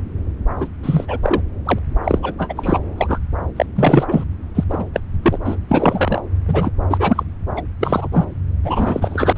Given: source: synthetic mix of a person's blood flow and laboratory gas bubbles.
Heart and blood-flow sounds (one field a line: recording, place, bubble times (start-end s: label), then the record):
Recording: Doppler ultrasound of blood flow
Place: subclavian vein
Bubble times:
0.58-0.68 s: bubbles
0.82-1.18 s: bubbles
1.23-1.41 s: bubbles
1.65-1.79 s: bubbles
2.04-2.19 s: bubbles
2.22-2.34 s: bubbles
2.38-2.53 s: bubbles
2.56-2.78 s: bubbles
2.95-3.18 s: bubbles
3.56-3.65 s: bubbles
3.75-4.24 s: bubbles
4.54-4.64 s: bubbles
4.70-4.85 s: bubbles
4.94-5.00 s: bubbles
5.23-5.38 s: bubbles
5.45-5.56 s: bubbles
5.69-6.22 s: bubbles
6.47-6.71 s: bubbles
6.89-7.24 s: bubbles
7.57-7.62 s: bubbles
7.81-8.08 s: bubbles
8.12-8.24 s: bubbles
8.62-9.33 s: bubbles
9.35-9.38 s: bubbles
From the record:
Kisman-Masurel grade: 243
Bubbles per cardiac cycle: several, 3 to 8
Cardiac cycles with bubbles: 100%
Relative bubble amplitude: loud (0.450 to 0.775)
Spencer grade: 3 (all of the cardiac periods contain showers or single bubble signals, but not dominating or overriding the cardiac motion signals)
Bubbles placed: anywhere in the cardiac cycle